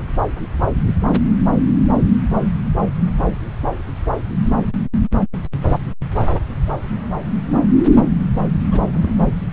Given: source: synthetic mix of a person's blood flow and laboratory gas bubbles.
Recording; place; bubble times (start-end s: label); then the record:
Doppler ultrasound of blood flow; subclavian vein
8.71-9.16 s: bubbles
From the record:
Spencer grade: 1 (occasional bubble signal discernible with the cardiac motion signal, with majority of cardiac periods free of bubbles); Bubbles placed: anywhere in the cardiac cycle